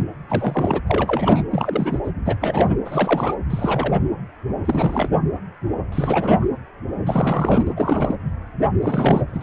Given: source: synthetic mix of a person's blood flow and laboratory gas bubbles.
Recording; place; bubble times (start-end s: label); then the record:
Doppler ultrasound of blood flow; precordium
0.00-0.03 s: bubbles
0.28-0.81 s: bubbles
0.87-1.44 s: bubbles
1.51-1.99 s: bubbles
2.04-2.10 s: bubbles
2.25-2.36 s: bubbles
2.41-2.76 s: bubbles
2.85-3.34 s: bubbles
3.50-4.01 s: bubbles
4.65-5.09 s: bubbles
5.92-6.46 s: bubbles
7.06-7.72 s: bubbles
7.76-8.15 s: bubbles
8.82-9.21 s: bubbles
9.33-9.43 s: bubbles
From the record:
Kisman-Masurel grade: 332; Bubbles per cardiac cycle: rolling drumbeat, 9 or more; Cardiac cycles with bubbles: 50 to 99%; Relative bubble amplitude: moderate (0.250 to 0.450); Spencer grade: 3 (all of the cardiac periods contain showers or single bubble signals, but not dominating or overriding the cardiac motion signals); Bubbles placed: anywhere in the cardiac cycle